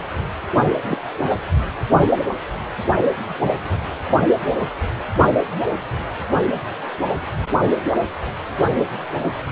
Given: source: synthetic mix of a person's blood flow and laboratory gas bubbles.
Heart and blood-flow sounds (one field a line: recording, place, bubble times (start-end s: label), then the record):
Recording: Doppler ultrasound of blood flow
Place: precordium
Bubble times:
0.83-0.97 s: bubbles
1.22-1.28 s: bubbles
From the record:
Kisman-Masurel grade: 122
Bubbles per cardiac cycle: 1 to 2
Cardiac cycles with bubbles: 10 to 50%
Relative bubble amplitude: moderate (0.250 to 0.450)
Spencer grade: 2 (many but less than half of the cardiac periods contain bubble signals, singularly or in groups)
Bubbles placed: only in the low amplitude regions of the cardiac cycle